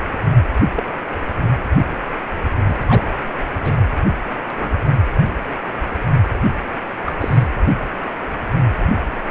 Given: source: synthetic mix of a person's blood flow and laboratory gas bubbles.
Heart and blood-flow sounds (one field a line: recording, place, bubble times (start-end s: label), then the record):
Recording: Doppler ultrasound of blood flow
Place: precordium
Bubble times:
0.76-0.86 s: bubbles
2.65-2.75 s: bubbles
2.89-3.08 s: bubbles
3.60-3.74 s: bubbles
4.58-4.70 s: bubbles
7.06-7.12 s: bubbles
7.21-7.43 s: bubbles
From the record:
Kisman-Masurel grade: 122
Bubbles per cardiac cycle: 1 to 2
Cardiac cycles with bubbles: 10 to 50%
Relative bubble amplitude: moderate (0.250 to 0.450)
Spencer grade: 2 (many but less than half of the cardiac periods contain bubble signals, singularly or in groups)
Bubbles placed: anywhere in the cardiac cycle